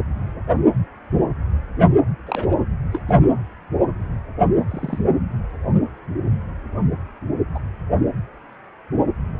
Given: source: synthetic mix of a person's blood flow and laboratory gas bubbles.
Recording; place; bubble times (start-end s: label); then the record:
Doppler ultrasound of blood flow; precordium
0.48-0.60 s: bubbles
2.27-2.56 s: bubbles
2.92-3.00 s: bubbles
3.08-3.15 s: bubbles
4.68-4.99 s: bubbles
7.54-7.59 s: bubbles
From the record:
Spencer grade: 2 (many but less than half of the cardiac periods contain bubble signals, singularly or in groups); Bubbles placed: anywhere in the cardiac cycle